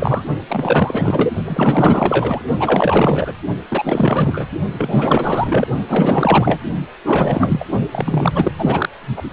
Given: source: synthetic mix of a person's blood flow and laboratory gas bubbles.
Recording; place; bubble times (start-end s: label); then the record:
Doppler ultrasound of blood flow; precordium
0.00-0.24 s: bubbles
0.48-1.33 s: bubbles
1.45-2.44 s: bubbles
2.59-3.33 s: bubbles
3.69-4.46 s: bubbles
4.77-5.69 s: bubbles
5.88-6.60 s: bubbles
7.04-7.64 s: bubbles
7.91-8.32 s: bubbles
8.35-8.52 s: bubbles
8.58-8.89 s: bubbles
9.16-9.23 s: bubbles
From the record:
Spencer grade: 4 (maximum detectable bubble signal sounding continuously throughout systole and diastole of every cardiac period, and overriding the amplitude of the normal cardiac signals); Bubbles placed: only in the low amplitude regions of the cardiac cycle